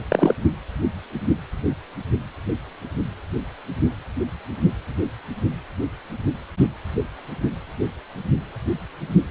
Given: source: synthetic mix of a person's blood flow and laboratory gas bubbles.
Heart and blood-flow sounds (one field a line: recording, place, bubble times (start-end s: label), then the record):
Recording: Doppler ultrasound of blood flow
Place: precordium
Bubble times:
0.09-0.34 s: bubbles
From the record:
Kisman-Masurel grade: 213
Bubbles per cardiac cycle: several, 3 to 8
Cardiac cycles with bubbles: 1 to 10%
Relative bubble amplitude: loud (0.450 to 0.775)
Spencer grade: 1 (occasional bubble signal discernible with the cardiac motion signal, with majority of cardiac periods free of bubbles)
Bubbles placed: anywhere in the cardiac cycle